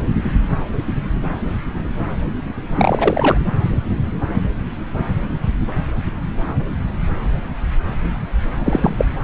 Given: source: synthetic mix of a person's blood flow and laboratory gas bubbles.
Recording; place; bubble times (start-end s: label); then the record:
Doppler ultrasound of blood flow; subclavian vein
2.76-3.38 s: bubbles
8.64-8.95 s: bubbles
8.97-9.05 s: bubbles
From the record:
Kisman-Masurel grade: 223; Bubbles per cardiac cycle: several, 3 to 8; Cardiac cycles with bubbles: 10 to 50%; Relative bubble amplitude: loud (0.450 to 0.775); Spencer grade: 2 (many but less than half of the cardiac periods contain bubble signals, singularly or in groups); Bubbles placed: anywhere in the cardiac cycle